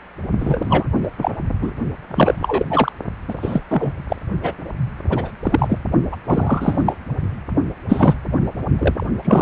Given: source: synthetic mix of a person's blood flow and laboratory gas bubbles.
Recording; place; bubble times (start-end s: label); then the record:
Doppler ultrasound of blood flow; precordium
0.39-0.85 s: bubbles
1.03-1.08 s: bubbles
1.18-1.31 s: bubbles
1.61-1.72 s: bubbles
2.08-2.65 s: bubbles
2.69-2.92 s: bubbles
3.28-3.63 s: bubbles
3.69-4.04 s: bubbles
4.08-4.17 s: bubbles
4.42-4.54 s: bubbles
5.09-5.31 s: bubbles
5.42-5.79 s: bubbles
6.12-6.17 s: bubbles
6.27-6.96 s: bubbles
7.89-8.15 s: bubbles
8.78-9.07 s: bubbles
9.25-9.42 s: bubbles
From the record:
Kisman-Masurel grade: 243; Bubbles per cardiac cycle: several, 3 to 8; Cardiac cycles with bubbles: 100%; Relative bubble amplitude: loud (0.450 to 0.775); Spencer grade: 3 (all of the cardiac periods contain showers or single bubble signals, but not dominating or overriding the cardiac motion signals); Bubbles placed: only in the low amplitude regions of the cardiac cycle